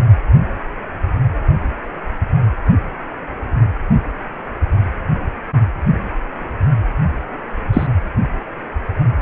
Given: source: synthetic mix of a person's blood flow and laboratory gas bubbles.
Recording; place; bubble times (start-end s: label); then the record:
Doppler ultrasound of blood flow; precordium
7.73-7.87 s: bubbles
From the record:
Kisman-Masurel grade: 113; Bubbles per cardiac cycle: 1 to 2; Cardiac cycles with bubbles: 1 to 10%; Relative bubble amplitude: loud (0.450 to 0.775); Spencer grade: 1 (occasional bubble signal discernible with the cardiac motion signal, with majority of cardiac periods free of bubbles); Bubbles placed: only in the low amplitude regions of the cardiac cycle